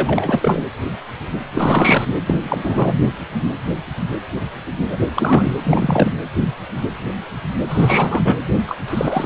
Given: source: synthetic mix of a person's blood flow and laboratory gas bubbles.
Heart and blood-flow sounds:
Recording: Doppler ultrasound of blood flow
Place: precordium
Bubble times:
0.00-0.60 s: bubbles
1.54-2.05 s: bubbles
2.26-2.35 s: bubbles
2.44-2.98 s: bubbles
4.88-4.99 s: bubbles
5.16-5.52 s: bubbles
5.63-6.12 s: bubbles
7.69-8.36 s: bubbles
8.67-8.78 s: bubbles
8.88-9.26 s: bubbles
From the record:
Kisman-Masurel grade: 333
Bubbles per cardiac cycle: rolling drumbeat, 9 or more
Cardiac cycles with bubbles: 50 to 99%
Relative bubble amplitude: loud (0.450 to 0.775)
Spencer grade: 3 (all of the cardiac periods contain showers or single bubble signals, but not dominating or overriding the cardiac motion signals)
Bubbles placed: anywhere in the cardiac cycle

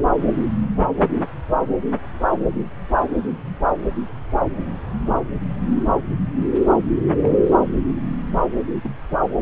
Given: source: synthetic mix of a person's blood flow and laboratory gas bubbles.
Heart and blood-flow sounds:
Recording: Doppler ultrasound of blood flow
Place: subclavian vein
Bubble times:
7.21-7.57 s: bubbles
8.84-8.94 s: bubbles
From the record:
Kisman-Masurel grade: 121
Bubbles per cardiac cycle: 1 to 2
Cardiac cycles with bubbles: 10 to 50%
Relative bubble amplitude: barely perceptible (0.100 to 0.250)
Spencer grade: 2 (many but less than half of the cardiac periods contain bubble signals, singularly or in groups)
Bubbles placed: anywhere in the cardiac cycle

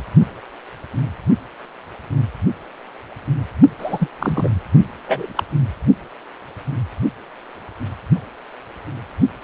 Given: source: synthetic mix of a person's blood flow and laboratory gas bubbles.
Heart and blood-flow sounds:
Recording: Doppler ultrasound of blood flow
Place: precordium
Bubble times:
3.78-4.08 s: bubbles
4.20-4.55 s: bubbles
5.08-5.33 s: bubbles
5.37-5.44 s: bubbles
From the record:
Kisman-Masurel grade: 212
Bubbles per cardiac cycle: several, 3 to 8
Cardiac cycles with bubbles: 1 to 10%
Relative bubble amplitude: moderate (0.250 to 0.450)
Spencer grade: 1 (occasional bubble signal discernible with the cardiac motion signal, with majority of cardiac periods free of bubbles)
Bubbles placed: only in the low amplitude regions of the cardiac cycle

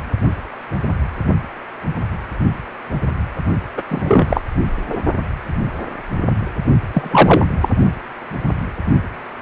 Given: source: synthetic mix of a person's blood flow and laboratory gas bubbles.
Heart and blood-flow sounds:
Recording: Doppler ultrasound of blood flow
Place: precordium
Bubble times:
3.76-3.83 s: bubbles
3.88-4.41 s: bubbles
4.89-4.98 s: bubbles
6.94-7.45 s: bubbles
7.60-7.68 s: bubbles
From the record:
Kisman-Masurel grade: 223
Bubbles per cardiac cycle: several, 3 to 8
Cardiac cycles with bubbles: 10 to 50%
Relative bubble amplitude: loud (0.450 to 0.775)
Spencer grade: 2 (many but less than half of the cardiac periods contain bubble signals, singularly or in groups)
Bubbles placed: only in the low amplitude regions of the cardiac cycle

